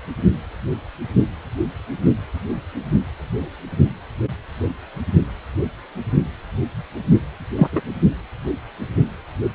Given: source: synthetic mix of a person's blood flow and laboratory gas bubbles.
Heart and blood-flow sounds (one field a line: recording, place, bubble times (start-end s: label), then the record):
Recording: Doppler ultrasound of blood flow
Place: precordium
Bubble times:
7.57-7.67 s: bubbles
7.72-7.81 s: bubbles
From the record:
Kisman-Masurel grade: 113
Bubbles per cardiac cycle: 1 to 2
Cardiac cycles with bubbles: 1 to 10%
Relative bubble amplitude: loud (0.450 to 0.775)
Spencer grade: 1 (occasional bubble signal discernible with the cardiac motion signal, with majority of cardiac periods free of bubbles)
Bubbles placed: anywhere in the cardiac cycle